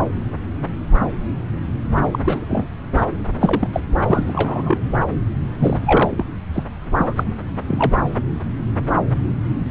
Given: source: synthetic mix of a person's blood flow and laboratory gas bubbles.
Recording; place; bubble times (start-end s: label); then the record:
Doppler ultrasound of blood flow; subclavian vein
0.00-0.06 s: bubbles
2.04-2.10 s: bubbles
2.12-2.19 s: bubbles
2.25-2.45 s: bubbles
2.48-2.65 s: bubbles
2.96-3.06 s: bubbles
3.36-3.68 s: bubbles
3.73-3.81 s: bubbles
4.02-4.80 s: bubbles
5.59-6.25 s: bubbles
6.53-6.63 s: bubbles
6.98-7.24 s: bubbles
7.68-7.96 s: bubbles
From the record:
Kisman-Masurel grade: 232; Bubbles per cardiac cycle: several, 3 to 8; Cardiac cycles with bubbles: 50 to 99%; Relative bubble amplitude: moderate (0.250 to 0.450); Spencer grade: 3 (all of the cardiac periods contain showers or single bubble signals, but not dominating or overriding the cardiac motion signals); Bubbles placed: anywhere in the cardiac cycle